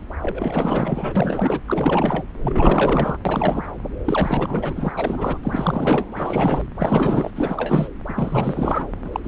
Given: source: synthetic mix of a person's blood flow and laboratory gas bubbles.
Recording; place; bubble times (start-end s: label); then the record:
Doppler ultrasound of blood flow; subclavian vein
0.21-1.60 s: bubbles
1.67-2.23 s: bubbles
2.42-3.17 s: bubbles
3.25-3.70 s: bubbles
4.04-4.93 s: bubbles
4.97-5.38 s: bubbles
5.43-6.06 s: bubbles
6.12-6.64 s: bubbles
6.76-7.30 s: bubbles
7.35-7.88 s: bubbles
8.08-8.87 s: bubbles
9.04-9.20 s: bubbles
9.23-9.28 s: bubbles
From the record:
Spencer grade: 4 (maximum detectable bubble signal sounding continuously throughout systole and diastole of every cardiac period, and overriding the amplitude of the normal cardiac signals); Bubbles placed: anywhere in the cardiac cycle